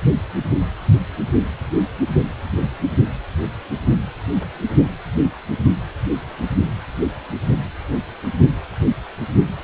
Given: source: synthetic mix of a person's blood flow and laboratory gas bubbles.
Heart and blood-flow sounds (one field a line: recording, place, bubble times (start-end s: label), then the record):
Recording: Doppler ultrasound of blood flow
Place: precordium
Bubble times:
no bubbles
From the record:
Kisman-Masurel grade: 000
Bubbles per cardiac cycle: 0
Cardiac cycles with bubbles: 0%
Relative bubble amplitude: no bubbles discernible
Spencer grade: 0 (complete lack of bubble signals)